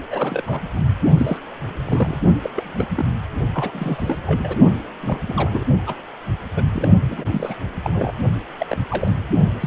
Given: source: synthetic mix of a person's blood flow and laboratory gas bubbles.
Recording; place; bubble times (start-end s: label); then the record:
Doppler ultrasound of blood flow; precordium
0.11-0.42 s: bubbles
0.47-0.62 s: bubbles
0.74-0.92 s: bubbles
1.17-1.38 s: bubbles
1.85-2.22 s: bubbles
2.44-2.50 s: bubbles
2.56-2.88 s: bubbles
2.96-3.06 s: bubbles
3.54-4.57 s: bubbles
5.02-5.19 s: bubbles
5.27-5.63 s: bubbles
5.87-5.95 s: bubbles
6.57-6.63 s: bubbles
6.73-6.88 s: bubbles
7.09-7.25 s: bubbles
7.32-7.56 s: bubbles
7.83-8.12 s: bubbles
8.58-8.76 s: bubbles
8.88-9.17 s: bubbles
9.60-9.67 s: bubbles
From the record:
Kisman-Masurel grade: 232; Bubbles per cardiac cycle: several, 3 to 8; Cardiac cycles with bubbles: 50 to 99%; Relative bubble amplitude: moderate (0.250 to 0.450); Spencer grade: 3 (all of the cardiac periods contain showers or single bubble signals, but not dominating or overriding the cardiac motion signals); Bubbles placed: only in the low amplitude regions of the cardiac cycle